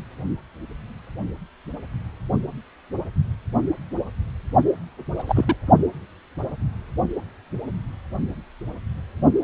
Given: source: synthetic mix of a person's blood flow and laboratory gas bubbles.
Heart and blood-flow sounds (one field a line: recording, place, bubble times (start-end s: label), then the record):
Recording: Doppler ultrasound of blood flow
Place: precordium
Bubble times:
5.18-5.23 s: bubbles
5.26-5.56 s: bubbles
From the record:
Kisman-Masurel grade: 212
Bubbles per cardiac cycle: several, 3 to 8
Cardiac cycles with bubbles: 1 to 10%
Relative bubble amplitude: moderate (0.250 to 0.450)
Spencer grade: 1 (occasional bubble signal discernible with the cardiac motion signal, with majority of cardiac periods free of bubbles)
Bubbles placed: only in the low amplitude regions of the cardiac cycle